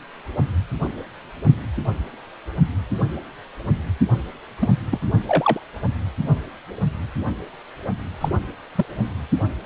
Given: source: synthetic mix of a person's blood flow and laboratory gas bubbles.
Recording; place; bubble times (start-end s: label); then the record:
Doppler ultrasound of blood flow; precordium
4.60-4.71 s: bubbles
4.91-5.00 s: bubbles
5.27-5.60 s: bubbles
8.21-8.29 s: bubbles
8.76-8.86 s: bubbles
From the record:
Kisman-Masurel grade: 122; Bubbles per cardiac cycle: 1 to 2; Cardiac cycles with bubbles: 10 to 50%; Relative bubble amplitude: moderate (0.250 to 0.450); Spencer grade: 2 (many but less than half of the cardiac periods contain bubble signals, singularly or in groups); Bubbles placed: only in the low amplitude regions of the cardiac cycle